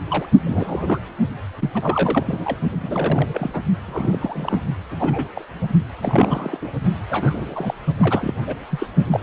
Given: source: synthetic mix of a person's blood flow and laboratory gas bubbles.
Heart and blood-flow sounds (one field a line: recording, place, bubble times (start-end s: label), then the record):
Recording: Doppler ultrasound of blood flow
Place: precordium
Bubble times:
0.10-0.26 s: bubbles
0.45-1.00 s: bubbles
1.59-1.70 s: bubbles
1.74-2.24 s: bubbles
2.26-2.56 s: bubbles
2.70-3.61 s: bubbles
3.86-4.60 s: bubbles
4.91-4.96 s: bubbles
4.99-5.29 s: bubbles
5.35-5.45 s: bubbles
6.02-6.71 s: bubbles
7.10-7.74 s: bubbles
7.97-8.34 s: bubbles
8.46-8.59 s: bubbles
8.70-8.87 s: bubbles
9.10-9.20 s: bubbles
From the record:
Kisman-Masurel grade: 342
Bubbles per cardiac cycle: rolling drumbeat, 9 or more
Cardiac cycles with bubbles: 100%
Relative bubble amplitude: moderate (0.250 to 0.450)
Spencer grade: 3 (all of the cardiac periods contain showers or single bubble signals, but not dominating or overriding the cardiac motion signals)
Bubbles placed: only in the low amplitude regions of the cardiac cycle